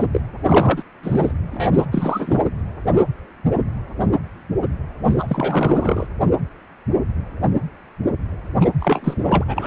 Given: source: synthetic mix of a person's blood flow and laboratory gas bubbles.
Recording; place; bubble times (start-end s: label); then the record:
Doppler ultrasound of blood flow; precordium
0.00-0.05 s: bubbles
0.12-0.21 s: bubbles
0.44-0.83 s: bubbles
1.03-1.31 s: bubbles
1.51-1.69 s: bubbles
1.72-1.85 s: bubbles
1.91-2.40 s: bubbles
5.05-6.06 s: bubbles
8.61-8.70 s: bubbles
8.80-9.44 s: bubbles
9.47-9.66 s: bubbles
From the record:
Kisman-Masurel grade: 333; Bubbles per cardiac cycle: rolling drumbeat, 9 or more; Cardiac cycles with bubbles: 50 to 99%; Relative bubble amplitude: loud (0.450 to 0.775); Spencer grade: 3 (all of the cardiac periods contain showers or single bubble signals, but not dominating or overriding the cardiac motion signals); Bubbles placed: anywhere in the cardiac cycle